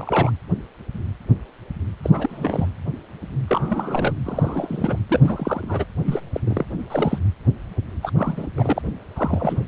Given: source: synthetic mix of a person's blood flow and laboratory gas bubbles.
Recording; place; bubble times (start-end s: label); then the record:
Doppler ultrasound of blood flow; precordium
0.00-0.32 s: bubbles
2.04-2.67 s: bubbles
3.47-4.12 s: bubbles
4.24-4.99 s: bubbles
5.10-5.86 s: bubbles
6.06-6.21 s: bubbles
6.34-6.41 s: bubbles
6.46-6.65 s: bubbles
6.90-7.19 s: bubbles
8.03-8.11 s: bubbles
8.18-8.47 s: bubbles
8.56-8.82 s: bubbles
9.16-9.63 s: bubbles
From the record:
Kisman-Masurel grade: 332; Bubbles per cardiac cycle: rolling drumbeat, 9 or more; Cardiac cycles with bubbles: 50 to 99%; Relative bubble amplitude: moderate (0.250 to 0.450); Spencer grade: 3 (all of the cardiac periods contain showers or single bubble signals, but not dominating or overriding the cardiac motion signals); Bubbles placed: anywhere in the cardiac cycle